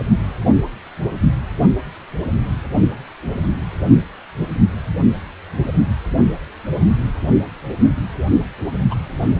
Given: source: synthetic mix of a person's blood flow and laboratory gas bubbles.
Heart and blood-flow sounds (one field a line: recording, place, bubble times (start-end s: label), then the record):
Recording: Doppler ultrasound of blood flow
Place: precordium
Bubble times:
8.91-8.95 s: bubbles
From the record:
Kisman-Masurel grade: 112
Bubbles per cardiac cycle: 1 to 2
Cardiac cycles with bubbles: 1 to 10%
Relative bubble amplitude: moderate (0.250 to 0.450)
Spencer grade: 1 (occasional bubble signal discernible with the cardiac motion signal, with majority of cardiac periods free of bubbles)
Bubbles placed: only in the low amplitude regions of the cardiac cycle